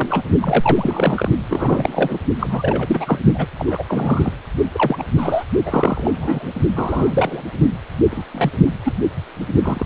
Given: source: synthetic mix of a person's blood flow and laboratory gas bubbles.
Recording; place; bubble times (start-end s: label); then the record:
Doppler ultrasound of blood flow; precordium
0.00-0.23 s: bubbles
0.41-1.29 s: bubbles
1.48-2.19 s: bubbles
2.39-3.19 s: bubbles
3.34-3.46 s: bubbles
3.59-3.83 s: bubbles
3.87-4.32 s: bubbles
4.72-5.03 s: bubbles
5.17-5.43 s: bubbles
5.65-6.52 s: bubbles
6.75-7.42 s: bubbles
8.11-8.26 s: bubbles
8.32-8.52 s: bubbles
8.85-8.94 s: bubbles
9.62-9.86 s: bubbles
From the record:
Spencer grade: 3 (all of the cardiac periods contain showers or single bubble signals, but not dominating or overriding the cardiac motion signals); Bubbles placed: only in the low amplitude regions of the cardiac cycle